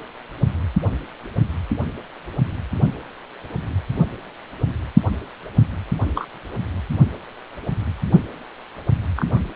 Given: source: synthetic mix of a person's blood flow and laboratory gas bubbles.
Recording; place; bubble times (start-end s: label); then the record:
Doppler ultrasound of blood flow; precordium
6.15-6.28 s: bubbles
9.16-9.50 s: bubbles
From the record:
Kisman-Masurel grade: 122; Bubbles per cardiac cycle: 1 to 2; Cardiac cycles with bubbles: 10 to 50%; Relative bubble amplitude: moderate (0.250 to 0.450); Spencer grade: 2 (many but less than half of the cardiac periods contain bubble signals, singularly or in groups); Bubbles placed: only in the low amplitude regions of the cardiac cycle